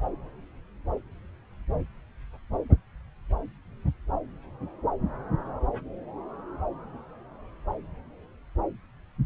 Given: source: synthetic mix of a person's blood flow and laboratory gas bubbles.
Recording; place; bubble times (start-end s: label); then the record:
Doppler ultrasound of blood flow; subclavian vein
no bubbles
From the record:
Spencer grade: 0 (complete lack of bubble signals)